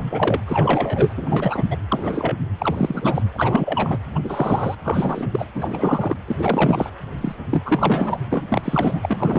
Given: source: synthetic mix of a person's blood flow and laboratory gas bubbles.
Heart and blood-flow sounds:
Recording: Doppler ultrasound of blood flow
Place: precordium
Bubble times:
0.00-0.40 s: bubbles
0.47-1.65 s: bubbles
1.70-1.77 s: bubbles
1.88-2.36 s: bubbles
2.58-3.23 s: bubbles
3.33-3.98 s: bubbles
4.15-4.20 s: bubbles
4.24-4.75 s: bubbles
4.83-5.29 s: bubbles
5.32-5.46 s: bubbles
5.54-6.17 s: bubbles
6.27-6.91 s: bubbles
7.21-7.35 s: bubbles
7.50-7.62 s: bubbles
7.65-8.17 s: bubbles
8.30-8.45 s: bubbles
8.48-8.62 s: bubbles
8.64-9.39 s: bubbles
From the record:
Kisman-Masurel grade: 343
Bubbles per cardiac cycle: rolling drumbeat, 9 or more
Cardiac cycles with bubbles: 100%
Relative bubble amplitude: loud (0.450 to 0.775)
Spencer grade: 3 (all of the cardiac periods contain showers or single bubble signals, but not dominating or overriding the cardiac motion signals)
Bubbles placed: anywhere in the cardiac cycle

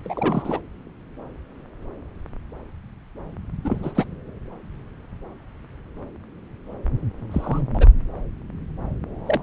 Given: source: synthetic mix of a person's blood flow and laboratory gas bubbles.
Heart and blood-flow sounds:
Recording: Doppler ultrasound of blood flow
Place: subclavian vein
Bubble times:
0.04-0.60 s: bubbles
3.64-3.92 s: bubbles
3.95-4.04 s: bubbles
7.31-7.65 s: bubbles
7.74-7.88 s: bubbles
9.26-9.40 s: bubbles
From the record:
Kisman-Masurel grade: 222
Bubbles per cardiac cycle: several, 3 to 8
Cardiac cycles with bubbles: 10 to 50%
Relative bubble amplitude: moderate (0.250 to 0.450)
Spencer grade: 2 (many but less than half of the cardiac periods contain bubble signals, singularly or in groups)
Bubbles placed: anywhere in the cardiac cycle

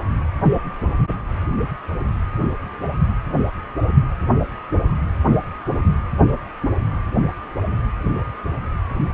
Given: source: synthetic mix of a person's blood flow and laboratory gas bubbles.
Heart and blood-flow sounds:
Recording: Doppler ultrasound of blood flow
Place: precordium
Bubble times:
no bubbles
From the record:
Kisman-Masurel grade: 000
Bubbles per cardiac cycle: 0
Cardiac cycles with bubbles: 0%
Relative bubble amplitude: no bubbles discernible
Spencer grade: 0 (complete lack of bubble signals)

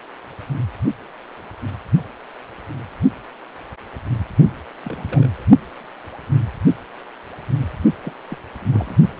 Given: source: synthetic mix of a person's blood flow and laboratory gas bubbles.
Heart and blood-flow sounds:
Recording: Doppler ultrasound of blood flow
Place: precordium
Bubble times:
4.83-5.45 s: bubbles
8.01-8.13 s: bubbles
8.29-8.38 s: bubbles
8.61-8.97 s: bubbles
From the record:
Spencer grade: 2 (many but less than half of the cardiac periods contain bubble signals, singularly or in groups)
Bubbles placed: only in the low amplitude regions of the cardiac cycle

